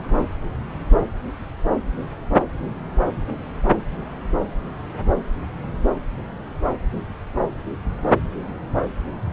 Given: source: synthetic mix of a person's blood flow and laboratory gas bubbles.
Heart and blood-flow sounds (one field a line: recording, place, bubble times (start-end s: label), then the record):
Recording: Doppler ultrasound of blood flow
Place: subclavian vein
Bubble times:
no bubbles
From the record:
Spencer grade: 0 (complete lack of bubble signals)